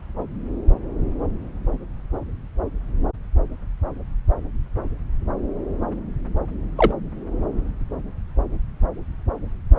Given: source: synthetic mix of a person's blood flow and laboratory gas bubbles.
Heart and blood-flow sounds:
Doppler ultrasound of blood flow; subclavian vein
6.77-6.92 s: bubbles
From the record:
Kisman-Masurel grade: 123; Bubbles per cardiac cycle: 1 to 2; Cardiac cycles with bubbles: 10 to 50%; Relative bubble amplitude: loud (0.450 to 0.775); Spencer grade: 2 (many but less than half of the cardiac periods contain bubble signals, singularly or in groups); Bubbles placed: anywhere in the cardiac cycle

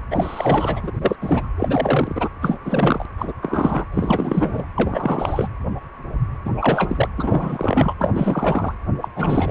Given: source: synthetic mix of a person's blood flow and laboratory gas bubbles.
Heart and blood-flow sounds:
Doppler ultrasound of blood flow; precordium
0.11-0.92 s: bubbles
0.95-1.16 s: bubbles
1.22-1.48 s: bubbles
1.57-2.29 s: bubbles
2.42-2.59 s: bubbles
2.65-3.06 s: bubbles
3.17-3.33 s: bubbles
3.42-3.86 s: bubbles
3.92-4.66 s: bubbles
4.75-5.50 s: bubbles
6.45-6.50 s: bubbles
6.54-7.08 s: bubbles
7.17-7.93 s: bubbles
7.99-8.74 s: bubbles
9.01-9.08 s: bubbles
9.15-9.51 s: bubbles
From the record:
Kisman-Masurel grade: 333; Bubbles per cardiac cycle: rolling drumbeat, 9 or more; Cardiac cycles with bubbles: 50 to 99%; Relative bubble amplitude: loud (0.450 to 0.775); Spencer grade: 3 (all of the cardiac periods contain showers or single bubble signals, but not dominating or overriding the cardiac motion signals); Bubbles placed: anywhere in the cardiac cycle

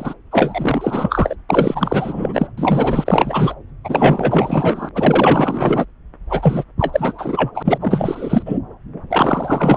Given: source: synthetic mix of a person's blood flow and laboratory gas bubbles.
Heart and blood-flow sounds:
Doppler ultrasound of blood flow; subclavian vein
0.00-0.14 s: bubbles
0.31-1.35 s: bubbles
1.49-2.47 s: bubbles
2.58-3.54 s: bubbles
3.84-4.89 s: bubbles
4.95-5.85 s: bubbles
6.29-6.64 s: bubbles
6.79-7.51 s: bubbles
7.54-7.78 s: bubbles
7.80-8.58 s: bubbles
9.10-9.77 s: bubbles
From the record:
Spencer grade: 4 (maximum detectable bubble signal sounding continuously throughout systole and diastole of every cardiac period, and overriding the amplitude of the normal cardiac signals); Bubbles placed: anywhere in the cardiac cycle

